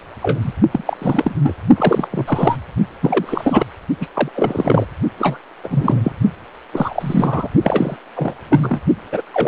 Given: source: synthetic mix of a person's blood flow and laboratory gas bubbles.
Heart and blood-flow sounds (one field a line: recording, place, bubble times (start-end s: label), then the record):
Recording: Doppler ultrasound of blood flow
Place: precordium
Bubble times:
0.22-0.52 s: bubbles
0.71-1.35 s: bubbles
1.42-1.54 s: bubbles
1.77-2.08 s: bubbles
2.10-2.57 s: bubbles
3.02-3.67 s: bubbles
4.00-4.07 s: bubbles
4.13-4.29 s: bubbles
4.35-4.86 s: bubbles
5.19-5.38 s: bubbles
5.63-6.12 s: bubbles
6.73-7.49 s: bubbles
7.62-7.97 s: bubbles
8.14-8.34 s: bubbles
8.48-8.79 s: bubbles
9.12-9.21 s: bubbles
9.33-9.48 s: bubbles
From the record:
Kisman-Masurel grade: 343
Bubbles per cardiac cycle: rolling drumbeat, 9 or more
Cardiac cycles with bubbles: 100%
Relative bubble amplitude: loud (0.450 to 0.775)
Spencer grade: 3 (all of the cardiac periods contain showers or single bubble signals, but not dominating or overriding the cardiac motion signals)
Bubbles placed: only in the low amplitude regions of the cardiac cycle